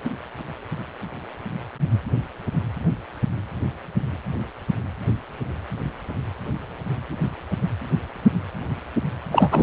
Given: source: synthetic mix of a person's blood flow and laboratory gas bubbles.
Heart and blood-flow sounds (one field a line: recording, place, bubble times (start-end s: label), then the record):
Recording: Doppler ultrasound of blood flow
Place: precordium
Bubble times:
9.32-9.63 s: bubbles
From the record:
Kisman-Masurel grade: 213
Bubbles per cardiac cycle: several, 3 to 8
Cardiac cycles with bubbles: 1 to 10%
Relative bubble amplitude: loud (0.450 to 0.775)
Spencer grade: 1 (occasional bubble signal discernible with the cardiac motion signal, with majority of cardiac periods free of bubbles)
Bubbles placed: anywhere in the cardiac cycle